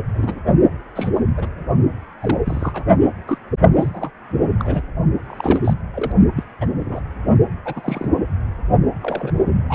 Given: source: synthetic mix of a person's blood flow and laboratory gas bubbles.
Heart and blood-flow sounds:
Doppler ultrasound of blood flow; precordium
0.13-0.40 s: bubbles
0.95-1.11 s: bubbles
1.15-1.21 s: bubbles
1.37-1.48 s: bubbles
2.21-2.39 s: bubbles
2.45-2.83 s: bubbles
3.27-3.38 s: bubbles
3.72-4.10 s: bubbles
4.41-4.47 s: bubbles
4.59-4.81 s: bubbles
5.26-5.59 s: bubbles
5.64-5.74 s: bubbles
5.94-6.12 s: bubbles
6.35-6.44 s: bubbles
6.60-6.66 s: bubbles
6.78-7.00 s: bubbles
7.65-8.09 s: bubbles
9.03-9.32 s: bubbles
9.36-9.43 s: bubbles
9.68-9.75 s: bubbles
From the record:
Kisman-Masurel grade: 242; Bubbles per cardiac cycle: several, 3 to 8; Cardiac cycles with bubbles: 100%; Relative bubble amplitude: moderate (0.250 to 0.450); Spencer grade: 3 (all of the cardiac periods contain showers or single bubble signals, but not dominating or overriding the cardiac motion signals); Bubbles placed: only in the low amplitude regions of the cardiac cycle

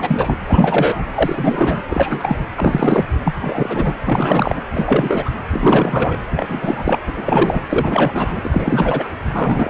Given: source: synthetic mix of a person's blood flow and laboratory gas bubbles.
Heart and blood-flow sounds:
Doppler ultrasound of blood flow; precordium
0.00-0.36 s: bubbles
0.47-1.03 s: bubbles
1.15-1.83 s: bubbles
1.90-2.37 s: bubbles
2.54-3.05 s: bubbles
3.25-3.34 s: bubbles
3.40-3.96 s: bubbles
4.06-4.61 s: bubbles
4.74-5.30 s: bubbles
5.50-6.17 s: bubbles
6.32-6.98 s: bubbles
7.07-7.13 s: bubbles
7.16-7.63 s: bubbles
7.69-8.42 s: bubbles
8.44-9.09 s: bubbles
9.33-9.70 s: bubbles
From the record:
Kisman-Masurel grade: 343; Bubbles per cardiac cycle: rolling drumbeat, 9 or more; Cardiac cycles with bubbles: 100%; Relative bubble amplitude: loud (0.450 to 0.775); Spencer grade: 3 (all of the cardiac periods contain showers or single bubble signals, but not dominating or overriding the cardiac motion signals); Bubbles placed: anywhere in the cardiac cycle

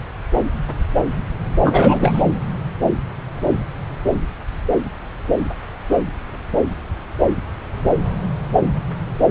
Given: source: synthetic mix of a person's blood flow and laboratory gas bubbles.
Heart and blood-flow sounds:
Doppler ultrasound of blood flow; subclavian vein
1.64-2.24 s: bubbles
From the record:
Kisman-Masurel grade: 213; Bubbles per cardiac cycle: several, 3 to 8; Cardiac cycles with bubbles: 1 to 10%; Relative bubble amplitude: loud (0.450 to 0.775); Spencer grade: 1 (occasional bubble signal discernible with the cardiac motion signal, with majority of cardiac periods free of bubbles); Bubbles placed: anywhere in the cardiac cycle

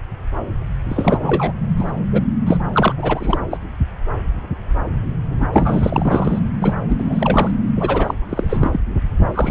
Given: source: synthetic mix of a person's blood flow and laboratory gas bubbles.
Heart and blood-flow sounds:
Doppler ultrasound of blood flow; subclavian vein
0.89-1.52 s: bubbles
1.77-1.92 s: bubbles
2.12-2.22 s: bubbles
2.46-2.57 s: bubbles
2.73-2.94 s: bubbles
2.97-3.38 s: bubbles
3.50-3.59 s: bubbles
5.30-5.47 s: bubbles
5.53-6.40 s: bubbles
6.62-6.74 s: bubbles
6.88-7.51 s: bubbles
7.77-8.14 s: bubbles
8.29-8.80 s: bubbles
9.33-9.51 s: bubbles
From the record:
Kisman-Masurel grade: 333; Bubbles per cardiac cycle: rolling drumbeat, 9 or more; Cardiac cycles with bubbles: 50 to 99%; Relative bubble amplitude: loud (0.450 to 0.775); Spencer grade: 3 (all of the cardiac periods contain showers or single bubble signals, but not dominating or overriding the cardiac motion signals); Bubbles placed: anywhere in the cardiac cycle

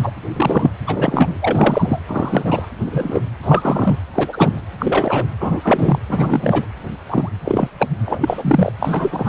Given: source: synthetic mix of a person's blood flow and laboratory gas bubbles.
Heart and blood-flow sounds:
Doppler ultrasound of blood flow; precordium
0.03-0.12 s: bubbles
0.36-0.70 s: bubbles
0.86-1.38 s: bubbles
1.41-2.00 s: bubbles
2.07-2.67 s: bubbles
2.85-3.21 s: bubbles
3.43-3.98 s: bubbles
4.13-4.60 s: bubbles
4.78-5.26 s: bubbles
5.40-5.60 s: bubbles
5.63-5.98 s: bubbles
6.08-6.67 s: bubbles
7.09-7.29 s: bubbles
7.44-7.69 s: bubbles
7.79-7.88 s: bubbles
8.06-8.72 s: bubbles
8.80-9.29 s: bubbles
From the record:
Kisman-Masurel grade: 243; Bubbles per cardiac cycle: several, 3 to 8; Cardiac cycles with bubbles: 100%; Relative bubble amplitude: loud (0.450 to 0.775); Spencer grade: 3 (all of the cardiac periods contain showers or single bubble signals, but not dominating or overriding the cardiac motion signals); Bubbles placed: anywhere in the cardiac cycle

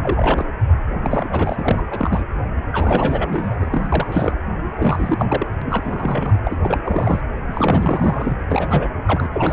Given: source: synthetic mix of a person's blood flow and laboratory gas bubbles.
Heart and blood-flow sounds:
Doppler ultrasound of blood flow; precordium
0.00-0.45 s: bubbles
0.93-1.82 s: bubbles
1.91-2.25 s: bubbles
2.72-3.56 s: bubbles
3.60-4.33 s: bubbles
4.65-5.46 s: bubbles
5.62-6.39 s: bubbles
6.45-6.59 s: bubbles
6.63-6.79 s: bubbles
6.84-7.21 s: bubbles
7.48-8.36 s: bubbles
8.51-8.88 s: bubbles
9.07-9.27 s: bubbles
9.33-9.52 s: bubbles
From the record:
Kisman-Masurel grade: 342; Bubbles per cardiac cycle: rolling drumbeat, 9 or more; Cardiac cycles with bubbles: 100%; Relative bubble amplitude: moderate (0.250 to 0.450); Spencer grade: 3 (all of the cardiac periods contain showers or single bubble signals, but not dominating or overriding the cardiac motion signals); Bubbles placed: anywhere in the cardiac cycle

